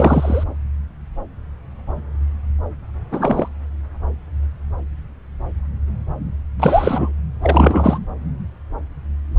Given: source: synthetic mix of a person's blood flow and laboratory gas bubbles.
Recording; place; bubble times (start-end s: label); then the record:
Doppler ultrasound of blood flow; subclavian vein
0.00-0.44 s: bubbles
3.11-3.48 s: bubbles
6.59-7.13 s: bubbles
7.42-7.99 s: bubbles
From the record:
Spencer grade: 2 (many but less than half of the cardiac periods contain bubble signals, singularly or in groups); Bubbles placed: anywhere in the cardiac cycle